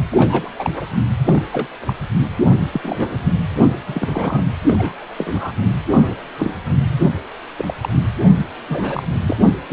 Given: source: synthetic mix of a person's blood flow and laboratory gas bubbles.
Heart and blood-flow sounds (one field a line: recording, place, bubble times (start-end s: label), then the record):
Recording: Doppler ultrasound of blood flow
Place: precordium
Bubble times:
0.10-0.48 s: bubbles
0.55-0.70 s: bubbles
0.74-0.84 s: bubbles
1.25-1.43 s: bubbles
1.52-1.68 s: bubbles
1.86-1.93 s: bubbles
2.72-3.18 s: bubbles
3.54-3.67 s: bubbles
3.88-4.41 s: bubbles
4.67-5.04 s: bubbles
5.17-5.52 s: bubbles
5.91-6.15 s: bubbles
6.39-6.55 s: bubbles
7.57-7.74 s: bubbles
7.82-7.89 s: bubbles
8.69-9.03 s: bubbles
9.26-9.37 s: bubbles
9.69-9.73 s: bubbles
From the record:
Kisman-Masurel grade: 232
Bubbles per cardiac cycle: several, 3 to 8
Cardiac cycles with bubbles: 50 to 99%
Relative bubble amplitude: moderate (0.250 to 0.450)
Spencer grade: 3 (all of the cardiac periods contain showers or single bubble signals, but not dominating or overriding the cardiac motion signals)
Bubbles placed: anywhere in the cardiac cycle